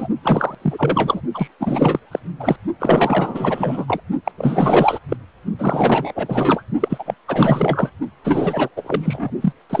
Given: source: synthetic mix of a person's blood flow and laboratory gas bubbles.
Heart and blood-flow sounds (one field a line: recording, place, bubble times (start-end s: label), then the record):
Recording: Doppler ultrasound of blood flow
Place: precordium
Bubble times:
0.00-0.08 s: bubbles
0.23-0.55 s: bubbles
0.61-1.22 s: bubbles
1.34-1.48 s: bubbles
1.59-1.99 s: bubbles
2.11-2.19 s: bubbles
2.40-2.56 s: bubbles
2.79-4.03 s: bubbles
4.25-4.31 s: bubbles
4.38-4.99 s: bubbles
5.08-5.17 s: bubbles
5.58-6.62 s: bubbles
6.80-7.14 s: bubbles
7.28-7.91 s: bubbles
8.24-8.69 s: bubbles
8.76-9.31 s: bubbles
9.41-9.53 s: bubbles
9.70-9.80 s: bubbles
From the record:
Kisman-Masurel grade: 444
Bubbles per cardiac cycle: continuous sound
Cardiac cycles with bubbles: 100%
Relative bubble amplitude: maximal (0.775 to 0.999)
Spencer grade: 4 (maximum detectable bubble signal sounding continuously throughout systole and diastole of every cardiac period, and overriding the amplitude of the normal cardiac signals)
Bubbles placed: only in the low amplitude regions of the cardiac cycle